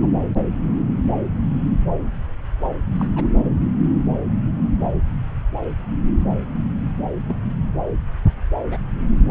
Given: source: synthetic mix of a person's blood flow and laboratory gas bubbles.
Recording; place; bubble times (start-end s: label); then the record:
Doppler ultrasound of blood flow; subclavian vein
0.02-0.09 s: bubbles
2.97-3.07 s: bubbles
3.16-3.26 s: bubbles
7.28-7.52 s: bubbles
8.70-8.78 s: bubbles
From the record:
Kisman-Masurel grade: 121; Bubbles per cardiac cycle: 1 to 2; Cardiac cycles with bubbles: 10 to 50%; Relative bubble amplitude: barely perceptible (0.100 to 0.250); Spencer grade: 2 (many but less than half of the cardiac periods contain bubble signals, singularly or in groups); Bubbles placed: anywhere in the cardiac cycle